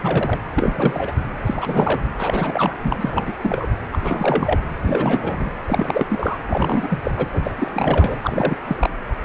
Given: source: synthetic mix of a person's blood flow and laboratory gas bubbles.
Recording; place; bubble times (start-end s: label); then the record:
Doppler ultrasound of blood flow; precordium
0.00-0.39 s: bubbles
0.54-1.11 s: bubbles
1.46-2.01 s: bubbles
2.18-2.74 s: bubbles
2.83-3.33 s: bubbles
3.41-3.68 s: bubbles
3.92-3.98 s: bubbles
4.03-4.59 s: bubbles
4.83-5.51 s: bubbles
5.67-6.07 s: bubbles
6.10-6.38 s: bubbles
6.49-6.99 s: bubbles
7.04-7.11 s: bubbles
7.17-7.27 s: bubbles
7.33-7.41 s: bubbles
7.44-7.52 s: bubbles
7.56-7.72 s: bubbles
7.74-8.56 s: bubbles
8.67-8.76 s: bubbles
8.80-8.90 s: bubbles
From the record:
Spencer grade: 3 (all of the cardiac periods contain showers or single bubble signals, but not dominating or overriding the cardiac motion signals); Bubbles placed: anywhere in the cardiac cycle